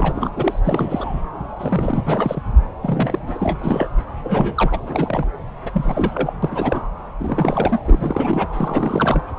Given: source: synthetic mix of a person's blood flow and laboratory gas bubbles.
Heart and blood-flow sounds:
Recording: Doppler ultrasound of blood flow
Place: subclavian vein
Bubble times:
0.00-0.31 s: bubbles
0.36-0.60 s: bubbles
0.64-1.21 s: bubbles
1.40-1.48 s: bubbles
1.59-2.02 s: bubbles
2.05-2.41 s: bubbles
2.82-3.58 s: bubbles
3.62-3.90 s: bubbles
4.23-4.79 s: bubbles
4.87-5.27 s: bubbles
5.65-6.33 s: bubbles
6.42-6.81 s: bubbles
7.19-7.79 s: bubbles
7.85-8.48 s: bubbles
8.52-9.23 s: bubbles
From the record:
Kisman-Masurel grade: 342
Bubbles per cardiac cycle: rolling drumbeat, 9 or more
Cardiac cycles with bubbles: 100%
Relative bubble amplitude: moderate (0.250 to 0.450)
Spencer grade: 3 (all of the cardiac periods contain showers or single bubble signals, but not dominating or overriding the cardiac motion signals)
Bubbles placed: anywhere in the cardiac cycle

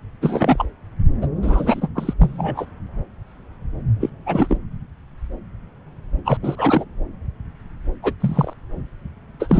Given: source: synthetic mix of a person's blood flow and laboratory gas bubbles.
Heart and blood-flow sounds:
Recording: Doppler ultrasound of blood flow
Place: subclavian vein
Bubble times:
0.21-0.65 s: bubbles
1.21-1.26 s: bubbles
1.42-1.89 s: bubbles
1.95-2.14 s: bubbles
2.19-2.66 s: bubbles
4.00-4.09 s: bubbles
4.26-4.57 s: bubbles
6.25-6.38 s: bubbles
6.42-6.85 s: bubbles
8.03-8.14 s: bubbles
8.20-8.54 s: bubbles
9.39-9.60 s: bubbles
From the record:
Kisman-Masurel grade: 233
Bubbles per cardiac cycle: several, 3 to 8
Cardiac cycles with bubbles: 50 to 99%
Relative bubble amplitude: loud (0.450 to 0.775)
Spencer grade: 3 (all of the cardiac periods contain showers or single bubble signals, but not dominating or overriding the cardiac motion signals)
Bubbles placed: anywhere in the cardiac cycle

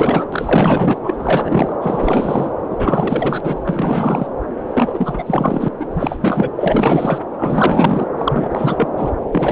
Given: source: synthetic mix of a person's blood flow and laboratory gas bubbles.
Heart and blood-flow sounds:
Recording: Doppler ultrasound of blood flow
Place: subclavian vein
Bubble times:
0.00-0.29 s: bubbles
0.32-0.98 s: bubbles
1.03-1.76 s: bubbles
1.81-2.52 s: bubbles
2.70-3.60 s: bubbles
3.65-4.28 s: bubbles
4.73-5.68 s: bubbles
5.79-5.86 s: bubbles
5.90-6.48 s: bubbles
6.55-7.19 s: bubbles
7.38-8.07 s: bubbles
8.17-8.89 s: bubbles
8.96-9.12 s: bubbles
9.31-9.52 s: bubbles
From the record:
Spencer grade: 4 (maximum detectable bubble signal sounding continuously throughout systole and diastole of every cardiac period, and overriding the amplitude of the normal cardiac signals)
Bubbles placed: anywhere in the cardiac cycle

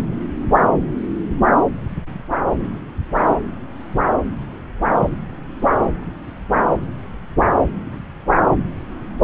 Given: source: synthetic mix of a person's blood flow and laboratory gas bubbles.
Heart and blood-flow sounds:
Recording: Doppler ultrasound of blood flow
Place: subclavian vein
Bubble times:
no bubbles
From the record:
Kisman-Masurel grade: 000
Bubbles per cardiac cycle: 0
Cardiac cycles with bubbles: 0%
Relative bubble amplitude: no bubbles discernible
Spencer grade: 0 (complete lack of bubble signals)

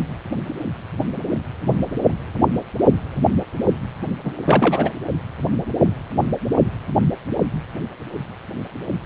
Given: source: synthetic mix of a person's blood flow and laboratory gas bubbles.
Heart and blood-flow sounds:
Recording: Doppler ultrasound of blood flow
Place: precordium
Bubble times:
4.25-4.33 s: bubbles
4.42-4.91 s: bubbles
From the record:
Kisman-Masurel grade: 212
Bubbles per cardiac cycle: several, 3 to 8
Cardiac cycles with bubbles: 1 to 10%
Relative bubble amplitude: moderate (0.250 to 0.450)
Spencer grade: 1 (occasional bubble signal discernible with the cardiac motion signal, with majority of cardiac periods free of bubbles)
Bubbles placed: anywhere in the cardiac cycle

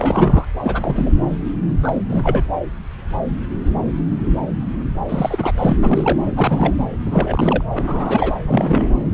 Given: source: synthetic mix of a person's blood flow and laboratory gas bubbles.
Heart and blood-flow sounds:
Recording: Doppler ultrasound of blood flow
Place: subclavian vein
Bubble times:
0.00-0.44 s: bubbles
0.63-1.12 s: bubbles
1.83-2.03 s: bubbles
2.08-2.49 s: bubbles
5.08-5.51 s: bubbles
5.58-5.77 s: bubbles
5.83-6.18 s: bubbles
6.26-6.33 s: bubbles
6.35-6.74 s: bubbles
7.05-7.64 s: bubbles
7.74-8.32 s: bubbles
8.43-8.92 s: bubbles
From the record:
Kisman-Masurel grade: 332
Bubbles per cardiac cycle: rolling drumbeat, 9 or more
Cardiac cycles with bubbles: 50 to 99%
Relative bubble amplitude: moderate (0.250 to 0.450)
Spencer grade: 3 (all of the cardiac periods contain showers or single bubble signals, but not dominating or overriding the cardiac motion signals)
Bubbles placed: anywhere in the cardiac cycle

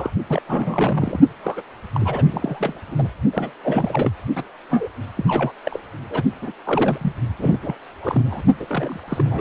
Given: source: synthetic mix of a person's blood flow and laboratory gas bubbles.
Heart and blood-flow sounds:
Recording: Doppler ultrasound of blood flow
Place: precordium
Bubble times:
0.00-0.10 s: bubbles
0.29-0.42 s: bubbles
0.48-1.20 s: bubbles
1.43-1.62 s: bubbles
1.94-2.24 s: bubbles
2.31-2.80 s: bubbles
2.87-3.08 s: bubbles
3.33-3.52 s: bubbles
3.64-4.10 s: bubbles
4.35-4.43 s: bubbles
4.69-4.88 s: bubbles
5.16-5.51 s: bubbles
5.65-5.80 s: bubbles
6.09-6.23 s: bubbles
6.42-6.52 s: bubbles
6.64-6.98 s: bubbles
7.01-7.12 s: bubbles
7.38-7.59 s: bubbles
7.62-7.75 s: bubbles
8.01-8.23 s: bubbles
8.25-8.42 s: bubbles
8.59-9.00 s: bubbles
9.07-9.41 s: bubbles
From the record:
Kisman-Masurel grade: 342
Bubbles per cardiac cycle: rolling drumbeat, 9 or more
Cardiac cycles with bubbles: 100%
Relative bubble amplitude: moderate (0.250 to 0.450)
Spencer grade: 3 (all of the cardiac periods contain showers or single bubble signals, but not dominating or overriding the cardiac motion signals)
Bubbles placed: only in the low amplitude regions of the cardiac cycle

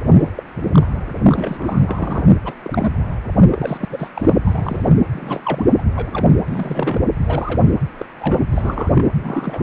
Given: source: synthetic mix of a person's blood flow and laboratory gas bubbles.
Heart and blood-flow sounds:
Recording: Doppler ultrasound of blood flow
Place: precordium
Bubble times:
0.12-0.30 s: bubbles
0.36-0.43 s: bubbles
0.72-0.89 s: bubbles
1.23-2.28 s: bubbles
2.44-2.54 s: bubbles
2.62-2.92 s: bubbles
3.51-3.85 s: bubbles
3.90-4.08 s: bubbles
4.14-4.38 s: bubbles
4.45-4.89 s: bubbles
5.11-5.41 s: bubbles
5.45-5.64 s: bubbles
5.77-5.82 s: bubbles
5.95-6.29 s: bubbles
6.48-7.05 s: bubbles
7.25-7.71 s: bubbles
7.99-8.05 s: bubbles
8.20-8.47 s: bubbles
8.51-9.04 s: bubbles
9.14-9.63 s: bubbles
From the record:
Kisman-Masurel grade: 242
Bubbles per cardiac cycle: several, 3 to 8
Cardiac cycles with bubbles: 100%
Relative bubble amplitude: moderate (0.250 to 0.450)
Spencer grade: 3 (all of the cardiac periods contain showers or single bubble signals, but not dominating or overriding the cardiac motion signals)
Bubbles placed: anywhere in the cardiac cycle

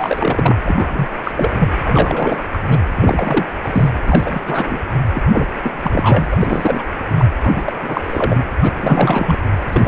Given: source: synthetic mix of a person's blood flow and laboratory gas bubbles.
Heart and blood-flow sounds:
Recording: Doppler ultrasound of blood flow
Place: precordium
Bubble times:
0.00-0.55 s: bubbles
0.66-1.09 s: bubbles
1.24-1.73 s: bubbles
1.84-2.38 s: bubbles
2.53-2.62 s: bubbles
2.69-2.80 s: bubbles
2.96-3.47 s: bubbles
3.64-3.90 s: bubbles
4.06-4.41 s: bubbles
4.46-4.79 s: bubbles
5.14-5.21 s: bubbles
5.30-5.46 s: bubbles
5.63-5.73 s: bubbles
5.82-6.38 s: bubbles
6.40-6.83 s: bubbles
7.08-7.25 s: bubbles
7.43-7.73 s: bubbles
7.83-8.44 s: bubbles
8.62-8.73 s: bubbles
8.79-9.38 s: bubbles
9.72-9.87 s: bubbles
From the record:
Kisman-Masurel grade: 332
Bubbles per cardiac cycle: rolling drumbeat, 9 or more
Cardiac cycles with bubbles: 50 to 99%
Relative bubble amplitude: moderate (0.250 to 0.450)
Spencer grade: 3 (all of the cardiac periods contain showers or single bubble signals, but not dominating or overriding the cardiac motion signals)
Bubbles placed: anywhere in the cardiac cycle

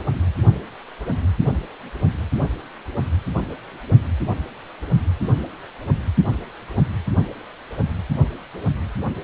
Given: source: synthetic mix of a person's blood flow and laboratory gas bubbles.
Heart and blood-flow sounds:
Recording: Doppler ultrasound of blood flow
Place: precordium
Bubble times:
no bubbles
From the record:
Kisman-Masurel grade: 000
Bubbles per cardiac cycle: 0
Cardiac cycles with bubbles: 0%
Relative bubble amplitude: no bubbles discernible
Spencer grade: 0 (complete lack of bubble signals)

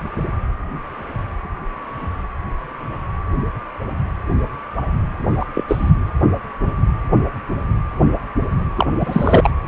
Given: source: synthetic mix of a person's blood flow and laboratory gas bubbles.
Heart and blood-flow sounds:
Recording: Doppler ultrasound of blood flow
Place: precordium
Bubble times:
5.39-5.46 s: bubbles
5.54-5.64 s: bubbles
5.67-5.90 s: bubbles
8.76-8.96 s: bubbles
9.00-9.50 s: bubbles
From the record:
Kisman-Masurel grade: 223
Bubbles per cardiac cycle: several, 3 to 8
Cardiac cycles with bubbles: 10 to 50%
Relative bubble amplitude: loud (0.450 to 0.775)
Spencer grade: 2 (many but less than half of the cardiac periods contain bubble signals, singularly or in groups)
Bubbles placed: anywhere in the cardiac cycle

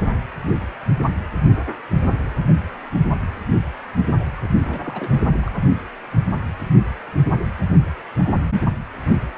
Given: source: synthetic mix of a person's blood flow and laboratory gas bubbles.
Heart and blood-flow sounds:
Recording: Doppler ultrasound of blood flow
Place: precordium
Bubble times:
4.64-5.23 s: bubbles
5.42-5.49 s: bubbles
5.52-5.61 s: bubbles
From the record:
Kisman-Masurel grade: 211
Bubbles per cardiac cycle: several, 3 to 8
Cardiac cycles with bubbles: 1 to 10%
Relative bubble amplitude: barely perceptible (0.100 to 0.250)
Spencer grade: 1 (occasional bubble signal discernible with the cardiac motion signal, with majority of cardiac periods free of bubbles)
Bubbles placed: only in the low amplitude regions of the cardiac cycle

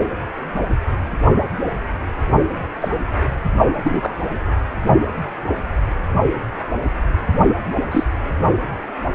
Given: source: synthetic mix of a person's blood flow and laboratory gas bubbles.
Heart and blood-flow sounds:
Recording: Doppler ultrasound of blood flow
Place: precordium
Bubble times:
2.80-2.88 s: bubbles
3.85-4.14 s: bubbles
7.91-8.04 s: bubbles
From the record:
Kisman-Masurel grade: 122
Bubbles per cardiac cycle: 1 to 2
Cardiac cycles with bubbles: 10 to 50%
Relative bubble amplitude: moderate (0.250 to 0.450)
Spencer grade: 2 (many but less than half of the cardiac periods contain bubble signals, singularly or in groups)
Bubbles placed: only in the low amplitude regions of the cardiac cycle

